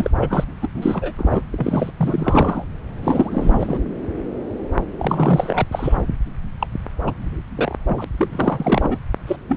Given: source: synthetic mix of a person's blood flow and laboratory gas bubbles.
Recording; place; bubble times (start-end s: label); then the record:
Doppler ultrasound of blood flow; subclavian vein
0.00-0.11 s: bubbles
0.19-0.44 s: bubbles
0.62-0.68 s: bubbles
0.75-1.14 s: bubbles
1.18-1.41 s: bubbles
1.52-1.91 s: bubbles
1.97-2.64 s: bubbles
3.03-3.83 s: bubbles
4.97-5.66 s: bubbles
5.71-5.98 s: bubbles
6.59-6.67 s: bubbles
7.06-7.11 s: bubbles
7.55-7.75 s: bubbles
7.87-8.04 s: bubbles
8.17-8.97 s: bubbles
9.27-9.37 s: bubbles
9.48-9.57 s: bubbles
From the record:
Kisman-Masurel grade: 332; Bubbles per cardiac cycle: rolling drumbeat, 9 or more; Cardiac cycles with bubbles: 50 to 99%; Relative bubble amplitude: moderate (0.250 to 0.450); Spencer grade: 3 (all of the cardiac periods contain showers or single bubble signals, but not dominating or overriding the cardiac motion signals); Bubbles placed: anywhere in the cardiac cycle